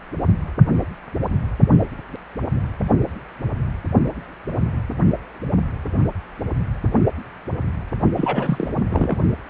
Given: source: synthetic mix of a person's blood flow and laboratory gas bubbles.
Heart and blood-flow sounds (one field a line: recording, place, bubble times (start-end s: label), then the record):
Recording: Doppler ultrasound of blood flow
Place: precordium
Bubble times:
8.16-8.73 s: bubbles
8.90-9.18 s: bubbles
From the record:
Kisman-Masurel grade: 212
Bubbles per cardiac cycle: several, 3 to 8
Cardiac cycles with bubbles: 1 to 10%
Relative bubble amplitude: moderate (0.250 to 0.450)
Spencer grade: 1 (occasional bubble signal discernible with the cardiac motion signal, with majority of cardiac periods free of bubbles)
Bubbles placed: only in the low amplitude regions of the cardiac cycle